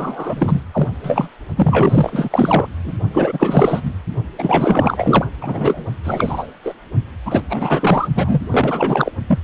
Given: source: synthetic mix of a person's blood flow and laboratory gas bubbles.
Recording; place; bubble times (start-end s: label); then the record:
Doppler ultrasound of blood flow; precordium
0.00-0.64 s: bubbles
0.72-0.88 s: bubbles
1.03-1.28 s: bubbles
1.56-2.68 s: bubbles
2.84-2.92 s: bubbles
3.12-3.92 s: bubbles
4.38-5.25 s: bubbles
5.41-5.86 s: bubbles
6.04-6.46 s: bubbles
6.64-6.74 s: bubbles
7.25-7.41 s: bubbles
7.49-8.08 s: bubbles
8.14-8.41 s: bubbles
8.51-9.11 s: bubbles
9.27-9.39 s: bubbles
From the record:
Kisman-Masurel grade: 444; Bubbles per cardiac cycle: continuous sound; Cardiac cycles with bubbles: 100%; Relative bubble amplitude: maximal (0.775 to 0.999); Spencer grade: 4 (maximum detectable bubble signal sounding continuously throughout systole and diastole of every cardiac period, and overriding the amplitude of the normal cardiac signals); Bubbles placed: only in the low amplitude regions of the cardiac cycle